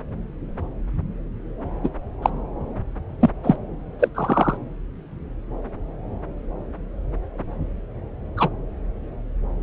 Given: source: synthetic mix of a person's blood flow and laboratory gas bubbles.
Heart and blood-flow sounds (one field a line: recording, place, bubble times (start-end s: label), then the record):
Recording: Doppler ultrasound of blood flow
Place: subclavian vein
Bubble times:
1.83-1.89 s: bubbles
2.22-2.30 s: bubbles
3.21-3.30 s: bubbles
3.44-3.56 s: bubbles
3.99-4.08 s: bubbles
4.15-4.57 s: bubbles
8.36-8.48 s: bubbles
From the record:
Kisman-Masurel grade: 123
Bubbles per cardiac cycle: 1 to 2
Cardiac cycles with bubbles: 10 to 50%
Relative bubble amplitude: loud (0.450 to 0.775)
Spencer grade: 2 (many but less than half of the cardiac periods contain bubble signals, singularly or in groups)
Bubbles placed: anywhere in the cardiac cycle